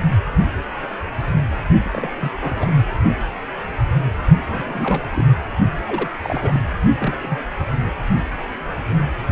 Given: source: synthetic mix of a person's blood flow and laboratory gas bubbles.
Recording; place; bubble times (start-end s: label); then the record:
Doppler ultrasound of blood flow; precordium
1.84-1.89 s: bubbles
1.92-2.32 s: bubbles
2.40-2.74 s: bubbles
4.48-5.01 s: bubbles
5.11-5.25 s: bubbles
5.87-6.08 s: bubbles
6.24-6.61 s: bubbles
6.99-7.13 s: bubbles
7.22-7.38 s: bubbles
From the record:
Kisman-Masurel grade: 221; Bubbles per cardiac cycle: several, 3 to 8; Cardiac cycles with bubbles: 10 to 50%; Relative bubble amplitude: barely perceptible (0.100 to 0.250); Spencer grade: 2 (many but less than half of the cardiac periods contain bubble signals, singularly or in groups); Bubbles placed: only in the low amplitude regions of the cardiac cycle